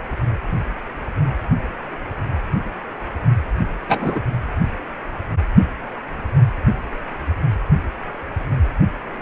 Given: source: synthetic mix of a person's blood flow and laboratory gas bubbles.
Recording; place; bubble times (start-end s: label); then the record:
Doppler ultrasound of blood flow; precordium
3.89-4.19 s: bubbles
From the record:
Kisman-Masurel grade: 113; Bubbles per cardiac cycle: 1 to 2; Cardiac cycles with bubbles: 1 to 10%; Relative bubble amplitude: loud (0.450 to 0.775); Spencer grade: 1 (occasional bubble signal discernible with the cardiac motion signal, with majority of cardiac periods free of bubbles); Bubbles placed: only in the low amplitude regions of the cardiac cycle